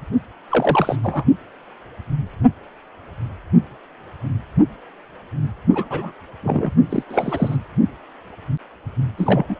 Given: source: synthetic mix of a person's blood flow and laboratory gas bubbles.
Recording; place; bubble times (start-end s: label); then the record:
Doppler ultrasound of blood flow; precordium
0.49-0.96 s: bubbles
1.03-1.24 s: bubbles
5.73-6.12 s: bubbles
6.43-6.71 s: bubbles
6.89-7.02 s: bubbles
7.09-7.56 s: bubbles
9.18-9.59 s: bubbles
From the record:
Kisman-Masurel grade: 222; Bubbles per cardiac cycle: several, 3 to 8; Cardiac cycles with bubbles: 10 to 50%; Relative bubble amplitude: moderate (0.250 to 0.450); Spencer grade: 2 (many but less than half of the cardiac periods contain bubble signals, singularly or in groups); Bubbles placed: only in the low amplitude regions of the cardiac cycle